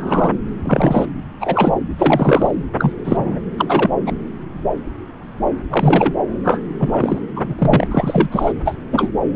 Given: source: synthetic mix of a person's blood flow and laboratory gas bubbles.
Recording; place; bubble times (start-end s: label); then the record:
Doppler ultrasound of blood flow; subclavian vein
0.00-0.33 s: bubbles
0.64-1.06 s: bubbles
1.40-1.75 s: bubbles
1.98-2.54 s: bubbles
2.79-2.92 s: bubbles
3.05-3.40 s: bubbles
3.58-3.91 s: bubbles
4.06-4.12 s: bubbles
5.70-6.14 s: bubbles
6.44-6.62 s: bubbles
6.79-7.19 s: bubbles
7.36-7.54 s: bubbles
7.58-7.87 s: bubbles
7.91-8.53 s: bubbles
8.64-8.75 s: bubbles
8.91-9.12 s: bubbles
From the record:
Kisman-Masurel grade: 233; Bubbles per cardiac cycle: several, 3 to 8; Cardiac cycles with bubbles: 50 to 99%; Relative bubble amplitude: loud (0.450 to 0.775); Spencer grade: 3 (all of the cardiac periods contain showers or single bubble signals, but not dominating or overriding the cardiac motion signals); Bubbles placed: anywhere in the cardiac cycle